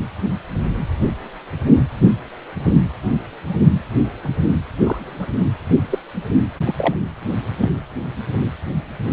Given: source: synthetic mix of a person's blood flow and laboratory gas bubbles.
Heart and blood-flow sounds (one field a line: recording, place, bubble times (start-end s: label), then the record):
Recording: Doppler ultrasound of blood flow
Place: precordium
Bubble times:
4.24-4.33 s: bubbles
4.85-5.27 s: bubbles
5.91-5.99 s: bubbles
6.65-6.74 s: bubbles
6.77-6.95 s: bubbles
7.61-7.69 s: bubbles
From the record:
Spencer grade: 2 (many but less than half of the cardiac periods contain bubble signals, singularly or in groups)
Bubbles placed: anywhere in the cardiac cycle